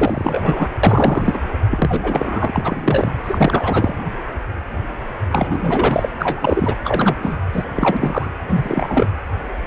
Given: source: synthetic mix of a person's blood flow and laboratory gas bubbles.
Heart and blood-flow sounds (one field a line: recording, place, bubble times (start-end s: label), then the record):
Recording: Doppler ultrasound of blood flow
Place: precordium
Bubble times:
0.00-0.69 s: bubbles
0.83-1.41 s: bubbles
1.71-2.50 s: bubbles
2.53-3.14 s: bubbles
3.23-3.95 s: bubbles
5.31-6.09 s: bubbles
6.20-6.75 s: bubbles
6.83-7.16 s: bubbles
7.22-7.37 s: bubbles
7.52-7.66 s: bubbles
7.75-8.28 s: bubbles
8.48-9.12 s: bubbles
From the record:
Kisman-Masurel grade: 333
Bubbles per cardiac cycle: rolling drumbeat, 9 or more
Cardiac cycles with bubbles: 50 to 99%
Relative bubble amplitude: loud (0.450 to 0.775)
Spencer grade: 3 (all of the cardiac periods contain showers or single bubble signals, but not dominating or overriding the cardiac motion signals)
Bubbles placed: anywhere in the cardiac cycle